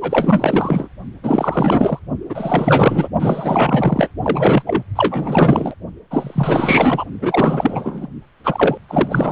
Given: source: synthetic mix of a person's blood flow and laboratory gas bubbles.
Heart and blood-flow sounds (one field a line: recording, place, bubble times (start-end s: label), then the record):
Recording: Doppler ultrasound of blood flow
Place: precordium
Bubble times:
0.01-0.89 s: bubbles
1.23-2.00 s: bubbles
2.29-3.08 s: bubbles
3.19-4.09 s: bubbles
4.22-4.62 s: bubbles
4.67-4.83 s: bubbles
4.96-5.74 s: bubbles
6.10-7.04 s: bubbles
7.21-8.06 s: bubbles
8.44-8.78 s: bubbles
8.88-9.32 s: bubbles
From the record:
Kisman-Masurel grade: 444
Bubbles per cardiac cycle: continuous sound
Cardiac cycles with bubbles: 100%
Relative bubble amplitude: maximal (0.775 to 0.999)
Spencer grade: 4 (maximum detectable bubble signal sounding continuously throughout systole and diastole of every cardiac period, and overriding the amplitude of the normal cardiac signals)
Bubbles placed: only in the low amplitude regions of the cardiac cycle